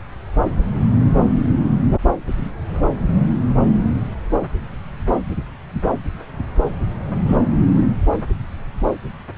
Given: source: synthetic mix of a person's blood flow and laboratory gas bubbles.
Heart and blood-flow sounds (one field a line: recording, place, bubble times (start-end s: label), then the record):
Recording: Doppler ultrasound of blood flow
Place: subclavian vein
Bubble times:
7.28-7.38 s: bubbles
From the record:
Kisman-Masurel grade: 112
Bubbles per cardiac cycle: 1 to 2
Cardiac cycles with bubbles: 1 to 10%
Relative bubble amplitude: moderate (0.250 to 0.450)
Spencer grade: 1 (occasional bubble signal discernible with the cardiac motion signal, with majority of cardiac periods free of bubbles)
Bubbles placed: anywhere in the cardiac cycle